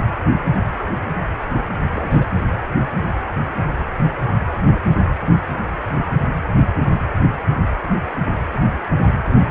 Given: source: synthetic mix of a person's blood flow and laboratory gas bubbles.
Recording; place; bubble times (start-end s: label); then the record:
Doppler ultrasound of blood flow; precordium
1.92-2.27 s: bubbles
From the record:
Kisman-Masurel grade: 211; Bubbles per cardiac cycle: several, 3 to 8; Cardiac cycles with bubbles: 1 to 10%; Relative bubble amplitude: barely perceptible (0.100 to 0.250); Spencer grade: 1 (occasional bubble signal discernible with the cardiac motion signal, with majority of cardiac periods free of bubbles); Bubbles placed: anywhere in the cardiac cycle